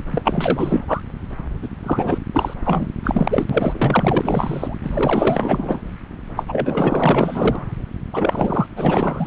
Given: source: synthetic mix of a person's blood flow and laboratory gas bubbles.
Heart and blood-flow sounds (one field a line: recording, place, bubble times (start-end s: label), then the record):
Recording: Doppler ultrasound of blood flow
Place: subclavian vein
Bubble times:
0.11-0.81 s: bubbles
0.88-1.00 s: bubbles
1.62-1.69 s: bubbles
1.82-2.18 s: bubbles
2.33-2.54 s: bubbles
2.65-2.88 s: bubbles
3.04-3.45 s: bubbles
3.50-4.78 s: bubbles
4.83-5.80 s: bubbles
6.36-6.44 s: bubbles
6.48-7.65 s: bubbles
8.12-8.66 s: bubbles
8.75-9.27 s: bubbles
From the record:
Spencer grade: 4 (maximum detectable bubble signal sounding continuously throughout systole and diastole of every cardiac period, and overriding the amplitude of the normal cardiac signals)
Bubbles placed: anywhere in the cardiac cycle